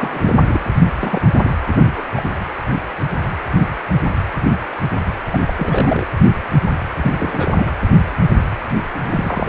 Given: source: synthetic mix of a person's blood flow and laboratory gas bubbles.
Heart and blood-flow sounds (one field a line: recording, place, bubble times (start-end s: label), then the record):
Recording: Doppler ultrasound of blood flow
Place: precordium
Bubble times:
0.00-0.69 s: bubbles
0.96-1.21 s: bubbles
1.31-1.50 s: bubbles
1.67-2.02 s: bubbles
2.15-2.23 s: bubbles
5.28-5.42 s: bubbles
5.47-5.54 s: bubbles
5.57-6.06 s: bubbles
7.01-7.74 s: bubbles
9.04-9.49 s: bubbles
From the record:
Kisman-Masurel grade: 332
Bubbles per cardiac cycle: rolling drumbeat, 9 or more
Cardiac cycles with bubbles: 50 to 99%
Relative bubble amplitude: moderate (0.250 to 0.450)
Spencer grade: 3 (all of the cardiac periods contain showers or single bubble signals, but not dominating or overriding the cardiac motion signals)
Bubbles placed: anywhere in the cardiac cycle